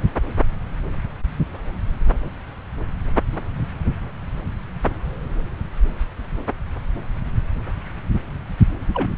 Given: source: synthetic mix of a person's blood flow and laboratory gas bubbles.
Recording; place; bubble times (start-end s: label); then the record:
Doppler ultrasound of blood flow; subclavian vein
8.94-9.14 s: bubbles
From the record:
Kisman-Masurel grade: 212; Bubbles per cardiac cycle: several, 3 to 8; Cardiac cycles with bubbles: 1 to 10%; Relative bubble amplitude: moderate (0.250 to 0.450); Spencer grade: 1 (occasional bubble signal discernible with the cardiac motion signal, with majority of cardiac periods free of bubbles); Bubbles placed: anywhere in the cardiac cycle